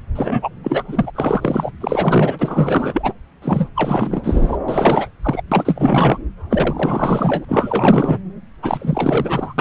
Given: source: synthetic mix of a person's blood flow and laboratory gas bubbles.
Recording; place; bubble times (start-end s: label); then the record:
Doppler ultrasound of blood flow; subclavian vein
0.15-0.49 s: bubbles
0.63-0.83 s: bubbles
0.87-1.11 s: bubbles
1.15-1.71 s: bubbles
1.81-3.13 s: bubbles
3.42-3.69 s: bubbles
3.75-4.58 s: bubbles
4.68-5.11 s: bubbles
5.23-5.43 s: bubbles
5.52-6.18 s: bubbles
6.50-7.45 s: bubbles
7.48-8.19 s: bubbles
8.62-9.54 s: bubbles
9.58-9.61 s: bubbles
From the record:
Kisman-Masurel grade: 444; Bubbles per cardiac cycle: continuous sound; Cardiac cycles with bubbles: 100%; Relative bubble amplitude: maximal (0.775 to 0.999); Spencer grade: 4 (maximum detectable bubble signal sounding continuously throughout systole and diastole of every cardiac period, and overriding the amplitude of the normal cardiac signals); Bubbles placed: anywhere in the cardiac cycle